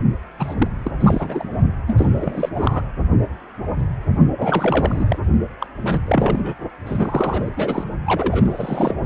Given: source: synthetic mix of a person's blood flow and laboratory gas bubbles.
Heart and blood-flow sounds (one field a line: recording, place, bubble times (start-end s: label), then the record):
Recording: Doppler ultrasound of blood flow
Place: precordium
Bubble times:
0.39-0.55 s: bubbles
0.57-0.68 s: bubbles
0.84-0.91 s: bubbles
1.00-1.47 s: bubbles
1.86-2.08 s: bubbles
2.16-2.49 s: bubbles
2.54-2.82 s: bubbles
4.38-5.18 s: bubbles
5.61-5.67 s: bubbles
5.85-6.00 s: bubbles
6.05-6.55 s: bubbles
6.86-7.49 s: bubbles
7.56-7.84 s: bubbles
8.06-8.95 s: bubbles
From the record:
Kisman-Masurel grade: 332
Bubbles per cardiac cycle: rolling drumbeat, 9 or more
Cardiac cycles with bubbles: 50 to 99%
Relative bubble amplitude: moderate (0.250 to 0.450)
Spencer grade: 3 (all of the cardiac periods contain showers or single bubble signals, but not dominating or overriding the cardiac motion signals)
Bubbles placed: only in the low amplitude regions of the cardiac cycle